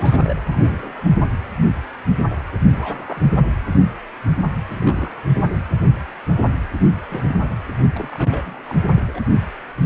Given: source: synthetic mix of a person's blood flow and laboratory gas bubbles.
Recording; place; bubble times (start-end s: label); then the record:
Doppler ultrasound of blood flow; precordium
0.00-0.36 s: bubbles
0.52-0.92 s: bubbles
0.98-1.03 s: bubbles
2.73-3.21 s: bubbles
3.36-3.42 s: bubbles
4.69-5.15 s: bubbles
5.33-5.43 s: bubbles
6.86-7.07 s: bubbles
7.09-7.54 s: bubbles
7.93-8.80 s: bubbles
8.90-9.04 s: bubbles
9.07-9.22 s: bubbles
9.26-9.28 s: bubbles
From the record:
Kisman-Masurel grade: 221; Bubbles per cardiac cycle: several, 3 to 8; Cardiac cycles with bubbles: 10 to 50%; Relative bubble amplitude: barely perceptible (0.100 to 0.250); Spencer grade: 2 (many but less than half of the cardiac periods contain bubble signals, singularly or in groups); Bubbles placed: anywhere in the cardiac cycle